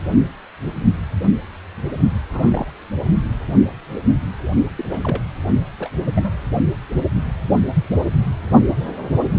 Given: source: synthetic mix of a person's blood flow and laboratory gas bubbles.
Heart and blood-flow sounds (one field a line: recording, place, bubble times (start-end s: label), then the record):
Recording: Doppler ultrasound of blood flow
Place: precordium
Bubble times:
2.32-2.71 s: bubbles
4.76-4.85 s: bubbles
4.88-5.21 s: bubbles
5.79-5.89 s: bubbles
6.06-6.10 s: bubbles
6.16-6.30 s: bubbles
From the record:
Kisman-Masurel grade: 221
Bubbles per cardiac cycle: several, 3 to 8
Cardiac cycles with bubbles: 10 to 50%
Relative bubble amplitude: barely perceptible (0.100 to 0.250)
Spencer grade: 2 (many but less than half of the cardiac periods contain bubble signals, singularly or in groups)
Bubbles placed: anywhere in the cardiac cycle